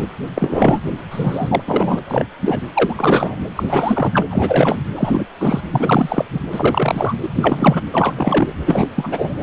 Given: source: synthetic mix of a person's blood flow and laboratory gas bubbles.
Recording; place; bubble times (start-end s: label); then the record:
Doppler ultrasound of blood flow; precordium
0.00-0.09 s: bubbles
0.34-0.81 s: bubbles
1.10-1.62 s: bubbles
1.65-1.99 s: bubbles
2.07-2.25 s: bubbles
2.42-2.60 s: bubbles
2.74-3.37 s: bubbles
3.56-3.63 s: bubbles
3.67-4.23 s: bubbles
4.30-4.82 s: bubbles
4.96-5.25 s: bubbles
5.40-5.61 s: bubbles
5.71-6.25 s: bubbles
6.32-6.39 s: bubbles
6.51-7.15 s: bubbles
7.22-7.29 s: bubbles
7.34-7.83 s: bubbles
7.92-8.52 s: bubbles
8.65-8.88 s: bubbles
8.95-9.33 s: bubbles
9.40-9.43 s: bubbles
From the record:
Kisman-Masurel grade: 343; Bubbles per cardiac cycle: rolling drumbeat, 9 or more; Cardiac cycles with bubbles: 100%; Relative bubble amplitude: loud (0.450 to 0.775); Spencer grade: 3 (all of the cardiac periods contain showers or single bubble signals, but not dominating or overriding the cardiac motion signals); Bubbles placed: anywhere in the cardiac cycle